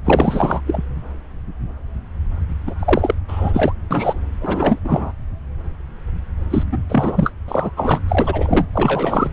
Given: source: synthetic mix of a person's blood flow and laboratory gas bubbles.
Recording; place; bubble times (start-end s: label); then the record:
Doppler ultrasound of blood flow; subclavian vein
0.04-0.60 s: bubbles
0.67-0.82 s: bubbles
2.66-2.75 s: bubbles
2.79-3.15 s: bubbles
3.27-3.73 s: bubbles
3.91-4.20 s: bubbles
4.41-4.79 s: bubbles
4.84-5.12 s: bubbles
6.50-6.63 s: bubbles
6.71-6.78 s: bubbles
6.89-7.33 s: bubbles
7.48-7.71 s: bubbles
7.77-8.02 s: bubbles
8.08-8.66 s: bubbles
8.73-9.30 s: bubbles
From the record:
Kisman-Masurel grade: 333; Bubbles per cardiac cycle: rolling drumbeat, 9 or more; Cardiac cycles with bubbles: 50 to 99%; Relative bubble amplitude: loud (0.450 to 0.775); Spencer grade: 3 (all of the cardiac periods contain showers or single bubble signals, but not dominating or overriding the cardiac motion signals); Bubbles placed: anywhere in the cardiac cycle